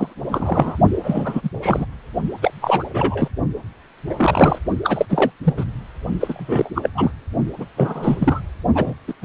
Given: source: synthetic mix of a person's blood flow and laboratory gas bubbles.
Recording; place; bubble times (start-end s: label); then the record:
Doppler ultrasound of blood flow; precordium
0.00-0.14 s: bubbles
0.29-0.77 s: bubbles
1.03-1.50 s: bubbles
1.61-1.85 s: bubbles
2.42-2.51 s: bubbles
2.61-2.83 s: bubbles
2.94-3.28 s: bubbles
4.08-4.58 s: bubbles
4.83-5.05 s: bubbles
5.09-5.31 s: bubbles
5.44-5.54 s: bubbles
5.57-5.65 s: bubbles
6.20-6.70 s: bubbles
6.75-6.90 s: bubbles
6.95-7.11 s: bubbles
7.58-7.65 s: bubbles
7.77-8.40 s: bubbles
8.75-8.94 s: bubbles
9.07-9.13 s: bubbles
9.21-9.24 s: bubbles
From the record:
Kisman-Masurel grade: 343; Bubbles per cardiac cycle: rolling drumbeat, 9 or more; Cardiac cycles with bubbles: 100%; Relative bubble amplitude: loud (0.450 to 0.775); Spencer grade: 3 (all of the cardiac periods contain showers or single bubble signals, but not dominating or overriding the cardiac motion signals); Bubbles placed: only in the low amplitude regions of the cardiac cycle